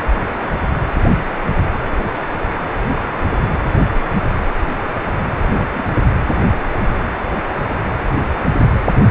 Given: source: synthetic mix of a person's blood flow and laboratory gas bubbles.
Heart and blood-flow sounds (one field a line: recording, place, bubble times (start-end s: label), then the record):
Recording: Doppler ultrasound of blood flow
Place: precordium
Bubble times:
5.50-5.83 s: bubbles
From the record:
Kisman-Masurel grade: 111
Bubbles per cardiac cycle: 1 to 2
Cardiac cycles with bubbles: 1 to 10%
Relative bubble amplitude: barely perceptible (0.100 to 0.250)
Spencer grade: 1 (occasional bubble signal discernible with the cardiac motion signal, with majority of cardiac periods free of bubbles)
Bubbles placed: anywhere in the cardiac cycle